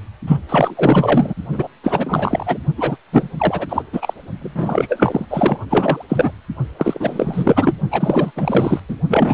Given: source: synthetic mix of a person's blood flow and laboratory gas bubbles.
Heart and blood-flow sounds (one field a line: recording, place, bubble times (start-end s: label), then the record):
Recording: Doppler ultrasound of blood flow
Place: precordium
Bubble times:
0.27-0.38 s: bubbles
0.49-0.74 s: bubbles
0.77-1.33 s: bubbles
1.52-1.68 s: bubbles
1.83-2.58 s: bubbles
2.77-2.96 s: bubbles
3.12-3.29 s: bubbles
3.38-3.83 s: bubbles
3.92-4.13 s: bubbles
4.39-5.25 s: bubbles
5.29-5.58 s: bubbles
5.70-6.04 s: bubbles
6.08-6.32 s: bubbles
6.79-7.73 s: bubbles
7.91-8.31 s: bubbles
8.36-8.80 s: bubbles
8.88-8.96 s: bubbles
9.07-9.34 s: bubbles
From the record:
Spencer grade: 4 (maximum detectable bubble signal sounding continuously throughout systole and diastole of every cardiac period, and overriding the amplitude of the normal cardiac signals)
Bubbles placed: only in the low amplitude regions of the cardiac cycle